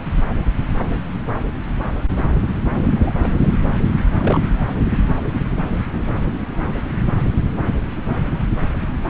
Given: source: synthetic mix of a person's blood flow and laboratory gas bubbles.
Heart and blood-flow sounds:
Doppler ultrasound of blood flow; subclavian vein
2.74-3.14 s: bubbles
3.22-3.27 s: bubbles
3.31-3.53 s: bubbles
4.21-4.40 s: bubbles
From the record:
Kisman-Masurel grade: 221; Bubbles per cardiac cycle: several, 3 to 8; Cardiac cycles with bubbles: 10 to 50%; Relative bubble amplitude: barely perceptible (0.100 to 0.250); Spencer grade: 2 (many but less than half of the cardiac periods contain bubble signals, singularly or in groups); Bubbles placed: anywhere in the cardiac cycle

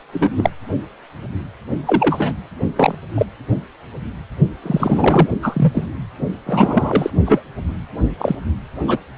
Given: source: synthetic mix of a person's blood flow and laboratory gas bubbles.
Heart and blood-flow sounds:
Doppler ultrasound of blood flow; precordium
0.00-0.02 s: bubbles
0.13-0.30 s: bubbles
0.38-0.50 s: bubbles
1.87-2.35 s: bubbles
2.75-2.95 s: bubbles
3.16-3.26 s: bubbles
4.62-5.29 s: bubbles
5.42-5.89 s: bubbles
6.46-7.10 s: bubbles
7.25-7.42 s: bubbles
8.19-8.35 s: bubbles
8.88-8.99 s: bubbles
From the record:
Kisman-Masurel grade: 233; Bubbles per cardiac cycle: several, 3 to 8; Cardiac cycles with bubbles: 50 to 99%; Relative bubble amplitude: loud (0.450 to 0.775); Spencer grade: 3 (all of the cardiac periods contain showers or single bubble signals, but not dominating or overriding the cardiac motion signals); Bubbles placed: only in the low amplitude regions of the cardiac cycle

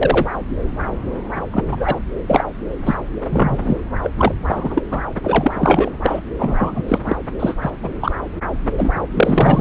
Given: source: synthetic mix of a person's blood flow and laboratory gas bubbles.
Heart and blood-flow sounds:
Doppler ultrasound of blood flow; subclavian vein
0.00-0.25 s: bubbles
1.52-1.64 s: bubbles
1.72-2.00 s: bubbles
2.29-2.44 s: bubbles
2.85-2.96 s: bubbles
3.23-3.76 s: bubbles
4.03-4.11 s: bubbles
4.18-4.32 s: bubbles
4.47-4.83 s: bubbles
4.91-5.03 s: bubbles
5.24-5.92 s: bubbles
6.02-6.20 s: bubbles
6.39-6.83 s: bubbles
6.88-6.99 s: bubbles
7.06-7.18 s: bubbles
7.39-7.55 s: bubbles
7.62-7.72 s: bubbles
7.83-7.90 s: bubbles
8.00-8.12 s: bubbles
8.77-8.89 s: bubbles
9.13-9.61 s: bubbles
From the record:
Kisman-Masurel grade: 243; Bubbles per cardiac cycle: several, 3 to 8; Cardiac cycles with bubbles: 100%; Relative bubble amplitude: loud (0.450 to 0.775); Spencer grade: 3 (all of the cardiac periods contain showers or single bubble signals, but not dominating or overriding the cardiac motion signals); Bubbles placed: anywhere in the cardiac cycle

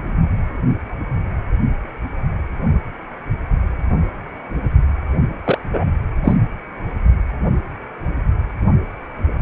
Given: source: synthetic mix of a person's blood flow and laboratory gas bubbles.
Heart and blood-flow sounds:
Doppler ultrasound of blood flow; precordium
5.45-5.58 s: bubbles
5.73-5.84 s: bubbles
6.24-6.36 s: bubbles
From the record:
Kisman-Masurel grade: 123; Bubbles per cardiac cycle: 1 to 2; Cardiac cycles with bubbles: 10 to 50%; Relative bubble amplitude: loud (0.450 to 0.775); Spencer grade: 2 (many but less than half of the cardiac periods contain bubble signals, singularly or in groups); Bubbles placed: anywhere in the cardiac cycle

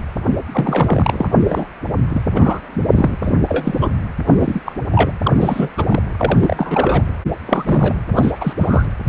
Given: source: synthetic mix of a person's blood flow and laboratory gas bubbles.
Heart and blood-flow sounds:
Doppler ultrasound of blood flow; precordium
0.53-1.30 s: bubbles
1.38-1.66 s: bubbles
2.09-2.22 s: bubbles
2.31-2.60 s: bubbles
2.75-2.85 s: bubbles
2.91-3.17 s: bubbles
3.22-3.32 s: bubbles
3.48-3.92 s: bubbles
4.24-4.62 s: bubbles
4.66-4.76 s: bubbles
4.91-5.12 s: bubbles
5.23-5.33 s: bubbles
5.38-5.69 s: bubbles
5.77-5.85 s: bubbles
5.88-6.02 s: bubbles
6.18-7.03 s: bubbles
7.46-7.96 s: bubbles
8.15-8.53 s: bubbles
8.57-8.85 s: bubbles
From the record:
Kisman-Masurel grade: 242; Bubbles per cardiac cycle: several, 3 to 8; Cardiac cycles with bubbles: 100%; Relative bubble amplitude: moderate (0.250 to 0.450); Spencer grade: 3 (all of the cardiac periods contain showers or single bubble signals, but not dominating or overriding the cardiac motion signals); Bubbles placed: anywhere in the cardiac cycle

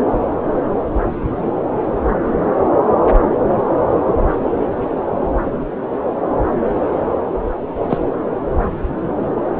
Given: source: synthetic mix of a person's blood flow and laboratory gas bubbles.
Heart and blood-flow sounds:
Doppler ultrasound of blood flow; subclavian vein
7.89-7.97 s: bubbles
From the record:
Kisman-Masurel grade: 113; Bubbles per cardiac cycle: 1 to 2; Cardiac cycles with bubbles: 1 to 10%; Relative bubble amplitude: loud (0.450 to 0.775); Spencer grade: 1 (occasional bubble signal discernible with the cardiac motion signal, with majority of cardiac periods free of bubbles); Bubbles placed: anywhere in the cardiac cycle

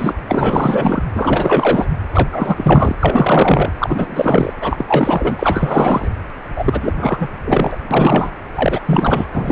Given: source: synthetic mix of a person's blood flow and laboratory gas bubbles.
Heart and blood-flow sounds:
Doppler ultrasound of blood flow; precordium
0.00-0.13 s: bubbles
0.28-1.03 s: bubbles
1.15-1.86 s: bubbles
2.12-2.27 s: bubbles
2.31-2.96 s: bubbles
3.02-3.70 s: bubbles
3.78-4.53 s: bubbles
4.60-6.07 s: bubbles
6.55-7.28 s: bubbles
7.45-7.76 s: bubbles
7.90-8.30 s: bubbles
8.55-8.80 s: bubbles
8.86-9.51 s: bubbles
From the record:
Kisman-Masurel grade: 444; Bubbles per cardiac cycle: continuous sound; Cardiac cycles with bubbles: 100%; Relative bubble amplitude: maximal (0.775 to 0.999); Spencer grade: 4 (maximum detectable bubble signal sounding continuously throughout systole and diastole of every cardiac period, and overriding the amplitude of the normal cardiac signals); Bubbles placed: anywhere in the cardiac cycle

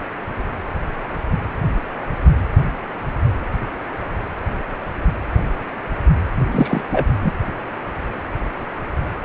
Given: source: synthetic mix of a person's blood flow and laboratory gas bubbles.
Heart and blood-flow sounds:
Doppler ultrasound of blood flow; precordium
6.51-6.82 s: bubbles
6.91-7.07 s: bubbles
7.24-7.32 s: bubbles
From the record:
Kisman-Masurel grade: 213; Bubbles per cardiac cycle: several, 3 to 8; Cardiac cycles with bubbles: 1 to 10%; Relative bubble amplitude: loud (0.450 to 0.775); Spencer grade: 1 (occasional bubble signal discernible with the cardiac motion signal, with majority of cardiac periods free of bubbles); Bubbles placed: anywhere in the cardiac cycle

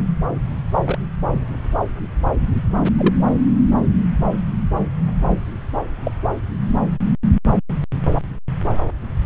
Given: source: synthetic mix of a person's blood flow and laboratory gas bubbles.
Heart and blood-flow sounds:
Doppler ultrasound of blood flow; subclavian vein
0.85-0.99 s: bubbles
2.95-3.33 s: bubbles
6.04-6.12 s: bubbles
From the record:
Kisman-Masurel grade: 122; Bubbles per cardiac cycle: 1 to 2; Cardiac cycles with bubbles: 10 to 50%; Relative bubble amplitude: moderate (0.250 to 0.450); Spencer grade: 2 (many but less than half of the cardiac periods contain bubble signals, singularly or in groups); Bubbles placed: anywhere in the cardiac cycle

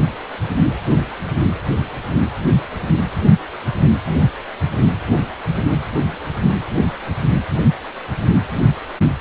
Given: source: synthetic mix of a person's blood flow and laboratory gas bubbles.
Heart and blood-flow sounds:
Doppler ultrasound of blood flow; precordium
no bubbles
From the record:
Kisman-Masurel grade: 000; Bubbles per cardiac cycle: 0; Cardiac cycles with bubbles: 0%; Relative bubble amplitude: no bubbles discernible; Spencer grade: 0 (complete lack of bubble signals)

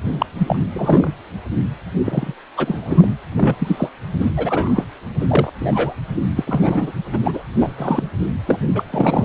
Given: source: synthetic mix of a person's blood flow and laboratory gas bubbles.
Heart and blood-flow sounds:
Doppler ultrasound of blood flow; precordium
0.18-0.26 s: bubbles
0.37-0.56 s: bubbles
0.70-1.14 s: bubbles
2.03-2.33 s: bubbles
2.56-3.08 s: bubbles
3.32-3.55 s: bubbles
3.60-3.89 s: bubbles
4.21-4.31 s: bubbles
4.37-4.85 s: bubbles
5.20-5.52 s: bubbles
5.59-5.95 s: bubbles
6.36-6.92 s: bubbles
7.12-7.44 s: bubbles
7.61-7.73 s: bubbles
7.78-8.08 s: bubbles
8.46-8.59 s: bubbles
8.75-8.84 s: bubbles
8.90-9.25 s: bubbles
From the record:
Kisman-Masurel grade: 243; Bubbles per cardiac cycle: several, 3 to 8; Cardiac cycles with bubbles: 100%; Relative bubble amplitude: loud (0.450 to 0.775); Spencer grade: 3 (all of the cardiac periods contain showers or single bubble signals, but not dominating or overriding the cardiac motion signals); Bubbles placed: anywhere in the cardiac cycle

